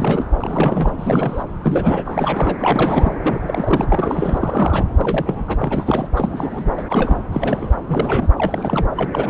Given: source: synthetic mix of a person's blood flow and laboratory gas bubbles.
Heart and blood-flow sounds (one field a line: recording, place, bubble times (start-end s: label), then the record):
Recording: Doppler ultrasound of blood flow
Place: subclavian vein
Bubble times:
0.00-0.26 s: bubbles
0.39-1.43 s: bubbles
1.64-2.55 s: bubbles
2.58-3.11 s: bubbles
3.23-3.40 s: bubbles
3.46-4.85 s: bubbles
4.96-5.58 s: bubbles
5.62-6.08 s: bubbles
6.15-6.83 s: bubbles
6.87-7.17 s: bubbles
7.29-7.75 s: bubbles
7.87-8.29 s: bubbles
8.38-8.86 s: bubbles
8.96-9.30 s: bubbles
From the record:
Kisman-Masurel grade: 342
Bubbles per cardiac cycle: rolling drumbeat, 9 or more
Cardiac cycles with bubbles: 100%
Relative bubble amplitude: moderate (0.250 to 0.450)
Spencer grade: 3 (all of the cardiac periods contain showers or single bubble signals, but not dominating or overriding the cardiac motion signals)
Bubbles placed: anywhere in the cardiac cycle